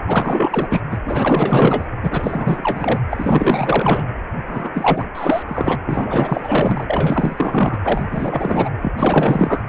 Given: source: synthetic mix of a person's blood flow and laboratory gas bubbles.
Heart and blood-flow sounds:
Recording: Doppler ultrasound of blood flow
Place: precordium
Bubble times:
0.07-0.81 s: bubbles
0.91-0.98 s: bubbles
1.05-1.87 s: bubbles
2.03-3.00 s: bubbles
3.10-4.08 s: bubbles
4.47-4.70 s: bubbles
4.73-5.04 s: bubbles
5.14-5.43 s: bubbles
5.47-5.75 s: bubbles
5.84-6.86 s: bubbles
6.89-7.81 s: bubbles
7.83-8.70 s: bubbles
8.81-8.92 s: bubbles
8.96-9.62 s: bubbles
From the record:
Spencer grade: 4 (maximum detectable bubble signal sounding continuously throughout systole and diastole of every cardiac period, and overriding the amplitude of the normal cardiac signals)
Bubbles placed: anywhere in the cardiac cycle

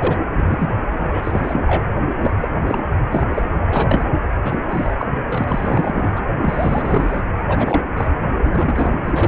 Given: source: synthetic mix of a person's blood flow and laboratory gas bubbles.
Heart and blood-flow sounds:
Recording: Doppler ultrasound of blood flow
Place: precordium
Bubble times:
0.00-0.18 s: bubbles
0.30-0.72 s: bubbles
0.99-1.07 s: bubbles
1.10-1.62 s: bubbles
1.67-1.83 s: bubbles
2.20-2.33 s: bubbles
2.40-2.48 s: bubbles
2.67-2.83 s: bubbles
3.11-3.26 s: bubbles
3.31-3.43 s: bubbles
3.69-4.10 s: bubbles
4.43-4.56 s: bubbles
4.71-4.92 s: bubbles
4.99-5.07 s: bubbles
5.29-5.44 s: bubbles
5.47-6.21 s: bubbles
6.42-7.21 s: bubbles
7.39-7.43 s: bubbles
7.48-7.91 s: bubbles
7.96-8.11 s: bubbles
8.43-8.93 s: bubbles
9.04-9.28 s: bubbles
From the record:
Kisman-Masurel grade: 342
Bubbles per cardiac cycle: rolling drumbeat, 9 or more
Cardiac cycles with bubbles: 100%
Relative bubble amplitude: moderate (0.250 to 0.450)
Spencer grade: 3 (all of the cardiac periods contain showers or single bubble signals, but not dominating or overriding the cardiac motion signals)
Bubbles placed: anywhere in the cardiac cycle

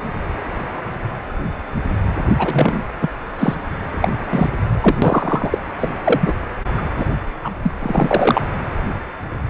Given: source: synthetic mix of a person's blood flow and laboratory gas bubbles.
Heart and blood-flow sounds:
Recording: Doppler ultrasound of blood flow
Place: precordium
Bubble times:
2.38-2.83 s: bubbles
3.01-3.09 s: bubbles
3.38-3.55 s: bubbles
4.00-4.08 s: bubbles
4.30-4.49 s: bubbles
4.62-4.98 s: bubbles
5.02-5.58 s: bubbles
5.79-5.92 s: bubbles
6.04-6.33 s: bubbles
6.77-6.82 s: bubbles
6.97-7.06 s: bubbles
7.42-7.51 s: bubbles
7.63-7.72 s: bubbles
7.82-8.47 s: bubbles
From the record:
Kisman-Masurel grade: 233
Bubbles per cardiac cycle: several, 3 to 8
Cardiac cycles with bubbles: 50 to 99%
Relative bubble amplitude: loud (0.450 to 0.775)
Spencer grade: 3 (all of the cardiac periods contain showers or single bubble signals, but not dominating or overriding the cardiac motion signals)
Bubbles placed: anywhere in the cardiac cycle

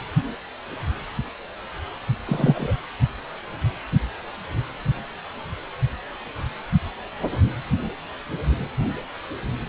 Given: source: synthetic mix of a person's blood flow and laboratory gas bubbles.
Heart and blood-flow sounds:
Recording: Doppler ultrasound of blood flow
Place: precordium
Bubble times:
2.26-2.75 s: bubbles
From the record:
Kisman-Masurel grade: 123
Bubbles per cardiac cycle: 1 to 2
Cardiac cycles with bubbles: 10 to 50%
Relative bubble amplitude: loud (0.450 to 0.775)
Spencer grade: 2 (many but less than half of the cardiac periods contain bubble signals, singularly or in groups)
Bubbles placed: anywhere in the cardiac cycle

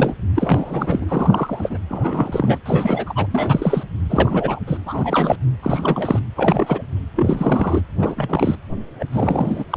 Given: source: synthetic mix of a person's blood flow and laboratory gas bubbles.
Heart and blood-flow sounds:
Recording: Doppler ultrasound of blood flow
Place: precordium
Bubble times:
0.00-0.14 s: bubbles
0.35-1.05 s: bubbles
1.08-1.78 s: bubbles
1.89-2.58 s: bubbles
2.65-3.27 s: bubbles
3.31-3.83 s: bubbles
4.09-4.59 s: bubbles
4.67-4.78 s: bubbles
4.85-5.37 s: bubbles
5.62-6.20 s: bubbles
6.35-6.82 s: bubbles
7.16-7.82 s: bubbles
7.98-8.56 s: bubbles
9.00-9.05 s: bubbles
9.12-9.65 s: bubbles
9.70-9.77 s: bubbles
From the record:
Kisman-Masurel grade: 342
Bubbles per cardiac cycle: rolling drumbeat, 9 or more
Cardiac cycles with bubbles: 100%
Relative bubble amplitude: moderate (0.250 to 0.450)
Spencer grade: 3 (all of the cardiac periods contain showers or single bubble signals, but not dominating or overriding the cardiac motion signals)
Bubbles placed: anywhere in the cardiac cycle

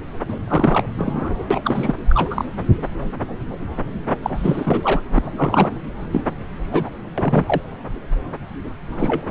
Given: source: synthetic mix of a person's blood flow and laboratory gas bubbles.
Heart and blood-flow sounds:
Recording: Doppler ultrasound of blood flow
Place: subclavian vein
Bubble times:
0.28-0.39 s: bubbles
0.47-0.87 s: bubbles
0.98-1.46 s: bubbles
1.50-1.93 s: bubbles
2.10-2.44 s: bubbles
4.22-5.02 s: bubbles
5.15-5.23 s: bubbles
5.26-5.31 s: bubbles
5.36-5.69 s: bubbles
6.12-6.21 s: bubbles
6.71-6.90 s: bubbles
7.17-7.62 s: bubbles
8.92-9.22 s: bubbles
From the record:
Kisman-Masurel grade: 232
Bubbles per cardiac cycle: several, 3 to 8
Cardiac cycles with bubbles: 50 to 99%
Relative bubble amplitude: moderate (0.250 to 0.450)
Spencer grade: 3 (all of the cardiac periods contain showers or single bubble signals, but not dominating or overriding the cardiac motion signals)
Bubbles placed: anywhere in the cardiac cycle

